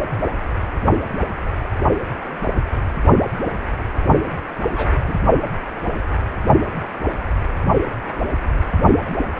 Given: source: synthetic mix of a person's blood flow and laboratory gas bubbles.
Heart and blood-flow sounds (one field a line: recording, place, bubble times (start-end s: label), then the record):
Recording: Doppler ultrasound of blood flow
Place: precordium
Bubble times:
4.73-4.91 s: bubbles
5.06-5.15 s: bubbles
From the record:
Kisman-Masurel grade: 122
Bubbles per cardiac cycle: 1 to 2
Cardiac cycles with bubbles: 10 to 50%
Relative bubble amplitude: moderate (0.250 to 0.450)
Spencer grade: 2 (many but less than half of the cardiac periods contain bubble signals, singularly or in groups)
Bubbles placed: only in the low amplitude regions of the cardiac cycle